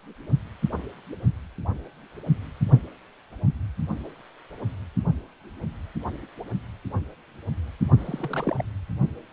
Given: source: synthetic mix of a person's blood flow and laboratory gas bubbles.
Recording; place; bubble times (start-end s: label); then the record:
Doppler ultrasound of blood flow; precordium
7.98-8.62 s: bubbles
From the record:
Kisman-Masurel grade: 221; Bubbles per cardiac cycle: several, 3 to 8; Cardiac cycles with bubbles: 10 to 50%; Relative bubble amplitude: barely perceptible (0.100 to 0.250); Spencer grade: 2 (many but less than half of the cardiac periods contain bubble signals, singularly or in groups); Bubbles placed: only in the low amplitude regions of the cardiac cycle